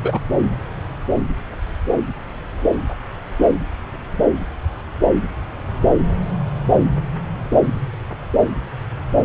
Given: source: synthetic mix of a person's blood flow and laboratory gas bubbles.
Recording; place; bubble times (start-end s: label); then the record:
Doppler ultrasound of blood flow; subclavian vein
0.03-0.20 s: bubbles
From the record:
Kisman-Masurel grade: 213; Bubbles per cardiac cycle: several, 3 to 8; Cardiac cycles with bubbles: 1 to 10%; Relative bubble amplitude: loud (0.450 to 0.775); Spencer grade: 1 (occasional bubble signal discernible with the cardiac motion signal, with majority of cardiac periods free of bubbles); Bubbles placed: anywhere in the cardiac cycle